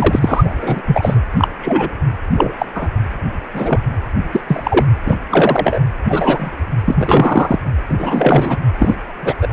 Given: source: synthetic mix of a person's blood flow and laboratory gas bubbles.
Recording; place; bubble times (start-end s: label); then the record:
Doppler ultrasound of blood flow; precordium
0.00-0.81 s: bubbles
0.86-1.20 s: bubbles
1.38-1.48 s: bubbles
1.60-1.90 s: bubbles
2.37-2.54 s: bubbles
2.58-2.66 s: bubbles
2.75-2.89 s: bubbles
3.52-3.80 s: bubbles
4.32-4.41 s: bubbles
4.47-4.85 s: bubbles
5.05-5.16 s: bubbles
5.31-5.79 s: bubbles
6.08-6.51 s: bubbles
6.84-7.58 s: bubbles
7.88-8.57 s: bubbles
8.79-8.95 s: bubbles
9.21-9.34 s: bubbles
9.41-9.47 s: bubbles
9.51-9.53 s: bubbles
From the record:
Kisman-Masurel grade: 243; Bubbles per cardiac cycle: several, 3 to 8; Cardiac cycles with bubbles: 100%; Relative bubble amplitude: loud (0.450 to 0.775); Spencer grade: 3 (all of the cardiac periods contain showers or single bubble signals, but not dominating or overriding the cardiac motion signals); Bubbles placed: anywhere in the cardiac cycle